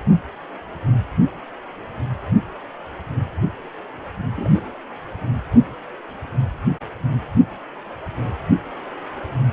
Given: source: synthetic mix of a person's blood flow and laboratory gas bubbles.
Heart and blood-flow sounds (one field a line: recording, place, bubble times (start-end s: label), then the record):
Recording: Doppler ultrasound of blood flow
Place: precordium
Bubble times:
4.36-4.72 s: bubbles
From the record:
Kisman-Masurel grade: 112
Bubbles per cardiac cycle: 1 to 2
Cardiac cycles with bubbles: 1 to 10%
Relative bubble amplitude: moderate (0.250 to 0.450)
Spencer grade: 1 (occasional bubble signal discernible with the cardiac motion signal, with majority of cardiac periods free of bubbles)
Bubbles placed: only in the low amplitude regions of the cardiac cycle